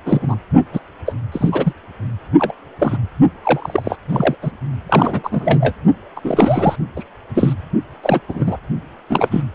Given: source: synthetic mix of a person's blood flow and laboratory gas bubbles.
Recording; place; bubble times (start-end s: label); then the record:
Doppler ultrasound of blood flow; precordium
0.05-0.36 s: bubbles
0.73-0.80 s: bubbles
1.06-1.14 s: bubbles
1.31-1.74 s: bubbles
2.38-2.53 s: bubbles
2.79-2.98 s: bubbles
3.43-3.96 s: bubbles
4.08-4.35 s: bubbles
4.42-4.52 s: bubbles
4.88-5.75 s: bubbles
6.16-6.21 s: bubbles
6.24-6.76 s: bubbles
6.96-7.04 s: bubbles
7.34-7.53 s: bubbles
8.03-8.20 s: bubbles
8.29-8.58 s: bubbles
9.10-9.42 s: bubbles
From the record:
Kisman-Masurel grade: 243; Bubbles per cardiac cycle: several, 3 to 8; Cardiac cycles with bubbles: 100%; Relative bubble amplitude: loud (0.450 to 0.775); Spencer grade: 3 (all of the cardiac periods contain showers or single bubble signals, but not dominating or overriding the cardiac motion signals); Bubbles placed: only in the low amplitude regions of the cardiac cycle